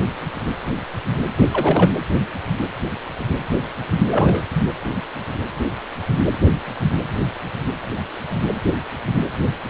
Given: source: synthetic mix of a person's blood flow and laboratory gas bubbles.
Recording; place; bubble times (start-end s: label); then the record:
Doppler ultrasound of blood flow; precordium
1.39-1.47 s: bubbles
1.52-1.91 s: bubbles
4.11-4.44 s: bubbles
4.59-4.68 s: bubbles
From the record:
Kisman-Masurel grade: 212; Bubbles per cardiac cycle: several, 3 to 8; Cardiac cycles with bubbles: 1 to 10%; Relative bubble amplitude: moderate (0.250 to 0.450); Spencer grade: 1 (occasional bubble signal discernible with the cardiac motion signal, with majority of cardiac periods free of bubbles); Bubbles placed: anywhere in the cardiac cycle